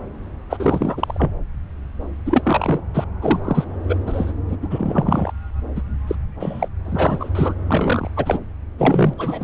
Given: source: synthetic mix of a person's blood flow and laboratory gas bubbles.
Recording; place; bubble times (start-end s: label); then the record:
Doppler ultrasound of blood flow; subclavian vein
0.50-0.57 s: bubbles
0.59-1.31 s: bubbles
2.25-2.80 s: bubbles
2.94-3.04 s: bubbles
3.21-3.40 s: bubbles
3.44-3.65 s: bubbles
3.89-3.96 s: bubbles
4.07-4.32 s: bubbles
4.48-4.56 s: bubbles
4.62-4.68 s: bubbles
4.70-5.32 s: bubbles
5.75-5.82 s: bubbles
6.07-6.16 s: bubbles
6.40-6.69 s: bubbles
6.85-7.29 s: bubbles
7.35-7.54 s: bubbles
7.68-8.10 s: bubbles
8.16-8.38 s: bubbles
8.78-9.13 s: bubbles
9.17-9.44 s: bubbles
From the record:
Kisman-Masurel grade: 342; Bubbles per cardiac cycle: rolling drumbeat, 9 or more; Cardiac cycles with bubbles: 100%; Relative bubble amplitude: moderate (0.250 to 0.450); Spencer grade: 3 (all of the cardiac periods contain showers or single bubble signals, but not dominating or overriding the cardiac motion signals); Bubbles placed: anywhere in the cardiac cycle